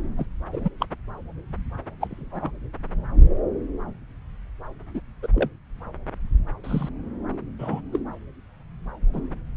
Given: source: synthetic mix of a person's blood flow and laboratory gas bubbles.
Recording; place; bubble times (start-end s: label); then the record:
Doppler ultrasound of blood flow; subclavian vein
0.17-0.25 s: bubbles
0.53-0.69 s: bubbles
0.80-0.86 s: bubbles
2.00-2.08 s: bubbles
2.10-2.51 s: bubbles
4.94-5.00 s: bubbles
5.22-5.27 s: bubbles
5.33-5.49 s: bubbles
6.63-6.89 s: bubbles
7.58-7.81 s: bubbles
7.92-8.00 s: bubbles
9.12-9.22 s: bubbles
From the record:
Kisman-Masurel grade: 122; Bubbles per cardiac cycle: 1 to 2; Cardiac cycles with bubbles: 10 to 50%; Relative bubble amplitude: moderate (0.250 to 0.450); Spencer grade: 2 (many but less than half of the cardiac periods contain bubble signals, singularly or in groups); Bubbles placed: anywhere in the cardiac cycle